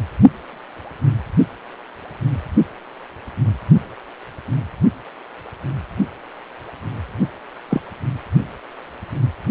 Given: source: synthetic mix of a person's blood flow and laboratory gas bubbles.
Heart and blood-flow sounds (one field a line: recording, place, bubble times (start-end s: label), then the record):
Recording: Doppler ultrasound of blood flow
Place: precordium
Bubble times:
7.69-7.81 s: bubbles
From the record:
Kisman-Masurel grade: 112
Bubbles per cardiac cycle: 1 to 2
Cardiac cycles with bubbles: 1 to 10%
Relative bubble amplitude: moderate (0.250 to 0.450)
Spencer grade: 1 (occasional bubble signal discernible with the cardiac motion signal, with majority of cardiac periods free of bubbles)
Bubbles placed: only in the low amplitude regions of the cardiac cycle